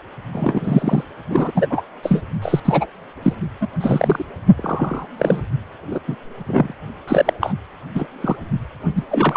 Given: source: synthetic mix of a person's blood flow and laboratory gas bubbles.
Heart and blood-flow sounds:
Doppler ultrasound of blood flow; precordium
0.33-1.04 s: bubbles
1.29-1.52 s: bubbles
1.54-1.67 s: bubbles
1.69-1.82 s: bubbles
2.02-2.21 s: bubbles
2.42-2.60 s: bubbles
2.65-2.86 s: bubbles
3.23-3.33 s: bubbles
3.60-3.67 s: bubbles
3.80-4.26 s: bubbles
4.57-5.06 s: bubbles
5.18-5.41 s: bubbles
5.91-5.99 s: bubbles
6.07-6.15 s: bubbles
6.46-6.72 s: bubbles
7.07-7.33 s: bubbles
7.40-7.54 s: bubbles
7.95-8.06 s: bubbles
8.21-8.36 s: bubbles
8.95-9.04 s: bubbles
9.08-9.37 s: bubbles
From the record:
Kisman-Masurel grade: 243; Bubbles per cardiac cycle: several, 3 to 8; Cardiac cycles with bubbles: 100%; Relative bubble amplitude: loud (0.450 to 0.775); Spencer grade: 3 (all of the cardiac periods contain showers or single bubble signals, but not dominating or overriding the cardiac motion signals); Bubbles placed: only in the low amplitude regions of the cardiac cycle

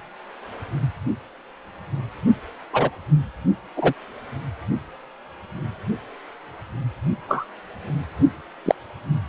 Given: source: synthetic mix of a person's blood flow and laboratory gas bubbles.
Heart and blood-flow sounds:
Doppler ultrasound of blood flow; precordium
2.73-2.90 s: bubbles
3.76-3.93 s: bubbles
7.29-7.45 s: bubbles
8.66-8.75 s: bubbles
From the record:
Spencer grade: 2 (many but less than half of the cardiac periods contain bubble signals, singularly or in groups); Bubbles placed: only in the low amplitude regions of the cardiac cycle

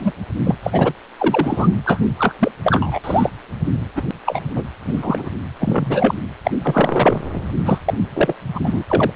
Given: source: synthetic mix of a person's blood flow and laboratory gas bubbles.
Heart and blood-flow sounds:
Doppler ultrasound of blood flow; precordium
0.00-0.11 s: bubbles
0.44-0.55 s: bubbles
0.62-0.93 s: bubbles
1.18-1.71 s: bubbles
1.85-2.02 s: bubbles
2.19-2.35 s: bubbles
2.39-2.52 s: bubbles
2.64-3.00 s: bubbles
3.04-3.30 s: bubbles
3.95-4.03 s: bubbles
4.26-4.41 s: bubbles
4.55-4.64 s: bubbles
4.68-4.70 s: bubbles
4.87-5.29 s: bubbles
5.60-6.14 s: bubbles
6.44-6.51 s: bubbles
6.63-7.22 s: bubbles
7.65-7.80 s: bubbles
7.85-7.94 s: bubbles
8.14-8.33 s: bubbles
8.54-8.60 s: bubbles
8.64-8.83 s: bubbles
8.89-9.12 s: bubbles
From the record:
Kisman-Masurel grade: 243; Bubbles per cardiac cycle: several, 3 to 8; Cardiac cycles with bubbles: 100%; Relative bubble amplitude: loud (0.450 to 0.775); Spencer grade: 3 (all of the cardiac periods contain showers or single bubble signals, but not dominating or overriding the cardiac motion signals); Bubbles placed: anywhere in the cardiac cycle

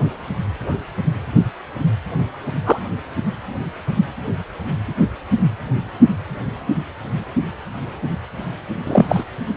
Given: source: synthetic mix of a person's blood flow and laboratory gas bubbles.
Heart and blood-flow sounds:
Doppler ultrasound of blood flow; precordium
2.66-2.79 s: bubbles
8.87-9.05 s: bubbles
9.08-9.24 s: bubbles
From the record:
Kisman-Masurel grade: 123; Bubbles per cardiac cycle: 1 to 2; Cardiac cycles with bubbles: 10 to 50%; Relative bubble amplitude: loud (0.450 to 0.775); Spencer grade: 2 (many but less than half of the cardiac periods contain bubble signals, singularly or in groups); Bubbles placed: anywhere in the cardiac cycle

